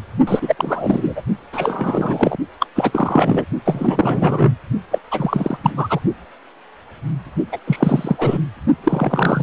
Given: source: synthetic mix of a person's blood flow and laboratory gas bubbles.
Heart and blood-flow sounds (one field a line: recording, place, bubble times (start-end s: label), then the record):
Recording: Doppler ultrasound of blood flow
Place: precordium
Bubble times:
0.27-1.22 s: bubbles
1.52-2.37 s: bubbles
2.60-2.66 s: bubbles
2.75-3.45 s: bubbles
3.65-4.54 s: bubbles
4.91-4.99 s: bubbles
5.11-5.58 s: bubbles
5.63-5.71 s: bubbles
5.77-6.00 s: bubbles
7.52-7.58 s: bubbles
7.67-8.38 s: bubbles
8.83-9.43 s: bubbles
From the record:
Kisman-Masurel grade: 333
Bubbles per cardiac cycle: rolling drumbeat, 9 or more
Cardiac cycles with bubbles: 50 to 99%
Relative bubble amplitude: loud (0.450 to 0.775)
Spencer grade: 3 (all of the cardiac periods contain showers or single bubble signals, but not dominating or overriding the cardiac motion signals)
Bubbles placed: only in the low amplitude regions of the cardiac cycle